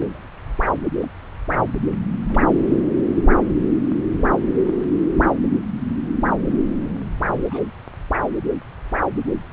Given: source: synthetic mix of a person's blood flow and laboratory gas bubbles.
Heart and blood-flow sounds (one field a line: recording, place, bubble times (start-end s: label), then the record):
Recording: Doppler ultrasound of blood flow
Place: subclavian vein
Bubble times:
0.00-0.22 s: bubbles
1.00-1.08 s: bubbles
2.28-2.42 s: bubbles
7.50-7.63 s: bubbles
9.25-9.33 s: bubbles
From the record:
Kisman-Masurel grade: 121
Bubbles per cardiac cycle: 1 to 2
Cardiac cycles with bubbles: 10 to 50%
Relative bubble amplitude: barely perceptible (0.100 to 0.250)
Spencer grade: 2 (many but less than half of the cardiac periods contain bubble signals, singularly or in groups)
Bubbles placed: anywhere in the cardiac cycle